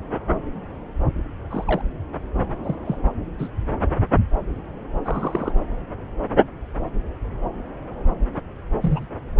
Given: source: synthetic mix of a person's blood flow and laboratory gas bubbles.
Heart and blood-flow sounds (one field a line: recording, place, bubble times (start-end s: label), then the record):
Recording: Doppler ultrasound of blood flow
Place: subclavian vein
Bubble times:
1.50-1.81 s: bubbles
2.63-2.75 s: bubbles
2.85-2.96 s: bubbles
3.38-3.48 s: bubbles
5.04-5.52 s: bubbles
8.82-9.07 s: bubbles
From the record:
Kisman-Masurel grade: 122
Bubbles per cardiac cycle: 1 to 2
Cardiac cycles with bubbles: 10 to 50%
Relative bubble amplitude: moderate (0.250 to 0.450)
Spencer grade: 2 (many but less than half of the cardiac periods contain bubble signals, singularly or in groups)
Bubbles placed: anywhere in the cardiac cycle